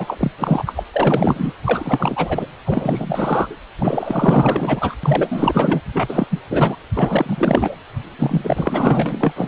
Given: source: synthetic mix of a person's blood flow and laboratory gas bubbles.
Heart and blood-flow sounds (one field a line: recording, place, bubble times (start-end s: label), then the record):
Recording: Doppler ultrasound of blood flow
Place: precordium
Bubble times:
0.00-0.31 s: bubbles
0.39-0.62 s: bubbles
0.66-0.84 s: bubbles
0.92-1.53 s: bubbles
1.65-2.46 s: bubbles
2.65-3.56 s: bubbles
3.79-4.95 s: bubbles
5.03-5.82 s: bubbles
5.92-6.28 s: bubbles
6.30-6.39 s: bubbles
6.50-6.76 s: bubbles
6.94-7.77 s: bubbles
8.19-9.48 s: bubbles
From the record:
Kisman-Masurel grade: 444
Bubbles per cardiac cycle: continuous sound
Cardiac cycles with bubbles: 100%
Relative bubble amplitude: maximal (0.775 to 0.999)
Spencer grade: 4 (maximum detectable bubble signal sounding continuously throughout systole and diastole of every cardiac period, and overriding the amplitude of the normal cardiac signals)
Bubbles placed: anywhere in the cardiac cycle